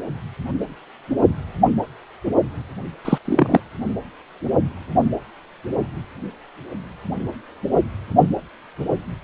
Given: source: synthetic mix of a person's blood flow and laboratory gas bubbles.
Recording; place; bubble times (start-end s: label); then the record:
Doppler ultrasound of blood flow; precordium
3.04-3.18 s: bubbles
3.25-3.60 s: bubbles
From the record:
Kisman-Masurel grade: 113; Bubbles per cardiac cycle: 1 to 2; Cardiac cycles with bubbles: 1 to 10%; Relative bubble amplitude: loud (0.450 to 0.775); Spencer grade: 1 (occasional bubble signal discernible with the cardiac motion signal, with majority of cardiac periods free of bubbles); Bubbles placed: only in the low amplitude regions of the cardiac cycle